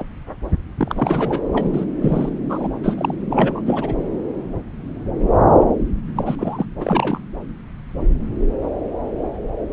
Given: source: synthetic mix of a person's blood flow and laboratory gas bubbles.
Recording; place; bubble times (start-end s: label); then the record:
Doppler ultrasound of blood flow; subclavian vein
0.00-0.04 s: bubbles
0.77-1.42 s: bubbles
1.52-1.84 s: bubbles
2.02-2.29 s: bubbles
2.49-2.68 s: bubbles
2.83-3.14 s: bubbles
3.29-3.62 s: bubbles
3.65-3.94 s: bubbles
6.16-6.35 s: bubbles
6.38-6.66 s: bubbles
6.80-7.21 s: bubbles
From the record:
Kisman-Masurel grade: 232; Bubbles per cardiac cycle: several, 3 to 8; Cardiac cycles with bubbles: 50 to 99%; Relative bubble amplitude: moderate (0.250 to 0.450); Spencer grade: 3 (all of the cardiac periods contain showers or single bubble signals, but not dominating or overriding the cardiac motion signals); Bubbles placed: anywhere in the cardiac cycle